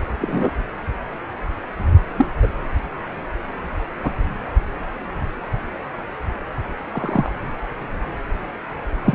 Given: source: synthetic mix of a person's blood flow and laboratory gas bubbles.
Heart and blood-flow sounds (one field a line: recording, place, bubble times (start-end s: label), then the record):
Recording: Doppler ultrasound of blood flow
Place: precordium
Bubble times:
0.21-0.51 s: bubbles
2.18-2.27 s: bubbles
2.42-2.48 s: bubbles
4.03-4.10 s: bubbles
6.92-7.31 s: bubbles
9.04-9.14 s: bubbles
From the record:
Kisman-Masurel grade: 123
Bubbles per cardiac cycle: 1 to 2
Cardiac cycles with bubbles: 10 to 50%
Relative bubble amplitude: loud (0.450 to 0.775)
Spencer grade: 2 (many but less than half of the cardiac periods contain bubble signals, singularly or in groups)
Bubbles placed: anywhere in the cardiac cycle